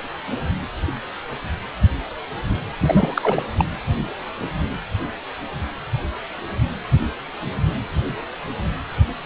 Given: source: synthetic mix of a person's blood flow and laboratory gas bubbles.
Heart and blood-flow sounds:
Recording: Doppler ultrasound of blood flow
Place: precordium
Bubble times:
2.79-3.42 s: bubbles
3.57-3.65 s: bubbles
From the record:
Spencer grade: 2 (many but less than half of the cardiac periods contain bubble signals, singularly or in groups)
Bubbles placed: anywhere in the cardiac cycle

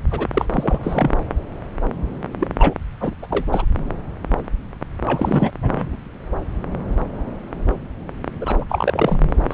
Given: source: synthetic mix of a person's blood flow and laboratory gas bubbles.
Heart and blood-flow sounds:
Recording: Doppler ultrasound of blood flow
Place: subclavian vein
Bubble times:
0.11-0.28 s: bubbles
0.34-0.46 s: bubbles
0.51-0.79 s: bubbles
0.83-1.11 s: bubbles
2.40-2.48 s: bubbles
2.58-2.74 s: bubbles
3.00-3.14 s: bubbles
3.22-3.27 s: bubbles
3.30-3.46 s: bubbles
3.51-3.65 s: bubbles
5.01-5.51 s: bubbles
5.62-5.96 s: bubbles
8.40-8.65 s: bubbles
8.69-9.40 s: bubbles
9.50-9.54 s: bubbles
From the record:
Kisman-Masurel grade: 332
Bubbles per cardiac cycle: rolling drumbeat, 9 or more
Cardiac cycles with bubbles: 50 to 99%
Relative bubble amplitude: moderate (0.250 to 0.450)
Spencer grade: 3 (all of the cardiac periods contain showers or single bubble signals, but not dominating or overriding the cardiac motion signals)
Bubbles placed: anywhere in the cardiac cycle

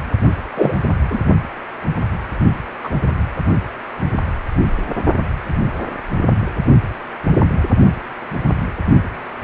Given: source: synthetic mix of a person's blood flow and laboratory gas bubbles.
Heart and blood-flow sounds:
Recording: Doppler ultrasound of blood flow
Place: precordium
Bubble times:
0.56-0.74 s: bubbles
1.10-1.18 s: bubbles
2.83-2.90 s: bubbles
From the record:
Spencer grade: 2 (many but less than half of the cardiac periods contain bubble signals, singularly or in groups)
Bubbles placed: only in the low amplitude regions of the cardiac cycle

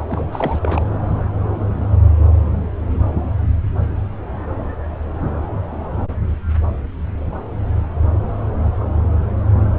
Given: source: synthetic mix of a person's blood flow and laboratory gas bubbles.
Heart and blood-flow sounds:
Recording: Doppler ultrasound of blood flow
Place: subclavian vein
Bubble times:
0.08-0.82 s: bubbles
From the record:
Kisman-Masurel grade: 211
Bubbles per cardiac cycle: several, 3 to 8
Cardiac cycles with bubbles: 1 to 10%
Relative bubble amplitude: barely perceptible (0.100 to 0.250)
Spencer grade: 1 (occasional bubble signal discernible with the cardiac motion signal, with majority of cardiac periods free of bubbles)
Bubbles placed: anywhere in the cardiac cycle

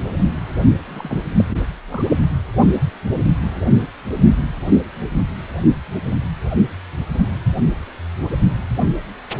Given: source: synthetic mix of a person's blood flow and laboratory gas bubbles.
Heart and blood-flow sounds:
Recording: Doppler ultrasound of blood flow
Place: precordium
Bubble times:
0.77-1.24 s: bubbles
1.38-1.44 s: bubbles
1.48-1.57 s: bubbles
1.87-2.05 s: bubbles
From the record:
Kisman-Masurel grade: 221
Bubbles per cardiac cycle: several, 3 to 8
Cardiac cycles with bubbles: 10 to 50%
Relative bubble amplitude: barely perceptible (0.100 to 0.250)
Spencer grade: 2 (many but less than half of the cardiac periods contain bubble signals, singularly or in groups)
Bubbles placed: only in the low amplitude regions of the cardiac cycle

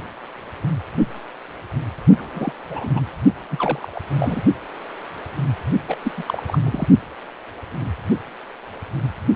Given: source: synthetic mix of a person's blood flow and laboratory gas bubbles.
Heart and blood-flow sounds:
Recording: Doppler ultrasound of blood flow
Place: precordium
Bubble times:
2.18-2.52 s: bubbles
2.69-3.01 s: bubbles
3.50-4.01 s: bubbles
4.19-4.41 s: bubbles
5.88-5.97 s: bubbles
6.04-6.12 s: bubbles
6.17-6.23 s: bubbles
6.26-6.43 s: bubbles
6.47-6.58 s: bubbles
6.64-6.88 s: bubbles
From the record:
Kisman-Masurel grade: 222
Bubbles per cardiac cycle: several, 3 to 8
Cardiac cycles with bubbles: 10 to 50%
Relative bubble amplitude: moderate (0.250 to 0.450)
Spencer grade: 2 (many but less than half of the cardiac periods contain bubble signals, singularly or in groups)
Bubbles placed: only in the low amplitude regions of the cardiac cycle

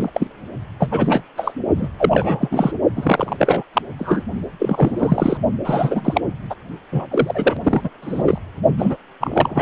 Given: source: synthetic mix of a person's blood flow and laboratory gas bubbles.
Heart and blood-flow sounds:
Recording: Doppler ultrasound of blood flow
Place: precordium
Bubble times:
0.00-0.10 s: bubbles
0.13-0.27 s: bubbles
0.78-1.21 s: bubbles
1.37-1.53 s: bubbles
1.76-1.88 s: bubbles
1.99-2.72 s: bubbles
2.95-3.63 s: bubbles
3.73-3.82 s: bubbles
3.98-4.23 s: bubbles
4.58-5.38 s: bubbles
5.64-6.21 s: bubbles
6.50-6.55 s: bubbles
6.92-7.06 s: bubbles
7.11-7.89 s: bubbles
8.02-8.22 s: bubbles
8.25-8.38 s: bubbles
8.77-8.97 s: bubbles
9.20-9.61 s: bubbles
From the record:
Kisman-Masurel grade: 343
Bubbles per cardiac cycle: rolling drumbeat, 9 or more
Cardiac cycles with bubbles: 100%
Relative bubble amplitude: loud (0.450 to 0.775)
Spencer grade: 3 (all of the cardiac periods contain showers or single bubble signals, but not dominating or overriding the cardiac motion signals)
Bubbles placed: only in the low amplitude regions of the cardiac cycle

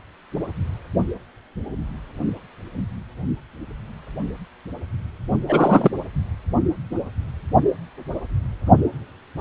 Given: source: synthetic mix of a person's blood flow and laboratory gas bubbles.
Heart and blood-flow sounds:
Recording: Doppler ultrasound of blood flow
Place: precordium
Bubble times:
5.48-5.90 s: bubbles
From the record:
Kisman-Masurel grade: 213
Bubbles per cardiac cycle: several, 3 to 8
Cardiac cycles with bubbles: 1 to 10%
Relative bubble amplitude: loud (0.450 to 0.775)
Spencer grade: 1 (occasional bubble signal discernible with the cardiac motion signal, with majority of cardiac periods free of bubbles)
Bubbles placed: only in the low amplitude regions of the cardiac cycle

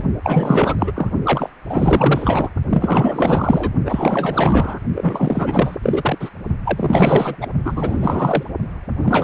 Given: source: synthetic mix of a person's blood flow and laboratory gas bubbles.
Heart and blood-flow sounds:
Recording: Doppler ultrasound of blood flow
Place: precordium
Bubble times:
0.00-0.04 s: bubbles
0.24-0.76 s: bubbles
0.79-0.92 s: bubbles
0.95-1.11 s: bubbles
1.24-1.50 s: bubbles
1.69-2.50 s: bubbles
2.69-3.71 s: bubbles
3.85-4.79 s: bubbles
4.95-5.77 s: bubbles
5.82-6.30 s: bubbles
6.65-7.48 s: bubbles
7.64-8.44 s: bubbles
9.03-9.24 s: bubbles
From the record:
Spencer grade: 4 (maximum detectable bubble signal sounding continuously throughout systole and diastole of every cardiac period, and overriding the amplitude of the normal cardiac signals)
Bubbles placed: only in the low amplitude regions of the cardiac cycle

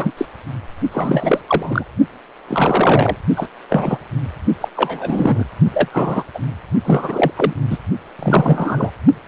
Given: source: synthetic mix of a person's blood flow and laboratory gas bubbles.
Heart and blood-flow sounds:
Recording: Doppler ultrasound of blood flow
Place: precordium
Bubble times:
0.00-0.11 s: bubbles
0.17-0.26 s: bubbles
0.91-1.42 s: bubbles
1.47-1.84 s: bubbles
2.47-3.17 s: bubbles
3.35-3.48 s: bubbles
3.69-3.98 s: bubbles
4.61-4.69 s: bubbles
4.77-5.45 s: bubbles
5.73-5.89 s: bubbles
5.92-6.23 s: bubbles
6.35-6.39 s: bubbles
6.85-7.32 s: bubbles
7.36-7.54 s: bubbles
7.70-7.79 s: bubbles
8.19-8.90 s: bubbles
From the record:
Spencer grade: 3 (all of the cardiac periods contain showers or single bubble signals, but not dominating or overriding the cardiac motion signals)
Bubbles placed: only in the low amplitude regions of the cardiac cycle

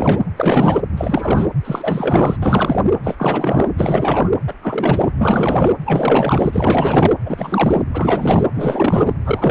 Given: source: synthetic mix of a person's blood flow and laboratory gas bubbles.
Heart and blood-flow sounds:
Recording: Doppler ultrasound of blood flow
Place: precordium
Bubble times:
0.00-0.19 s: bubbles
0.36-0.81 s: bubbles
0.97-1.50 s: bubbles
1.65-2.37 s: bubbles
2.42-2.81 s: bubbles
3.04-3.15 s: bubbles
3.18-3.70 s: bubbles
3.77-4.31 s: bubbles
4.47-4.54 s: bubbles
4.62-5.12 s: bubbles
5.18-5.72 s: bubbles
5.85-6.50 s: bubbles
6.52-7.13 s: bubbles
7.25-7.84 s: bubbles
7.92-8.47 s: bubbles
8.54-9.13 s: bubbles
9.25-9.51 s: bubbles
From the record:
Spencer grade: 4 (maximum detectable bubble signal sounding continuously throughout systole and diastole of every cardiac period, and overriding the amplitude of the normal cardiac signals)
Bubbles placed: anywhere in the cardiac cycle

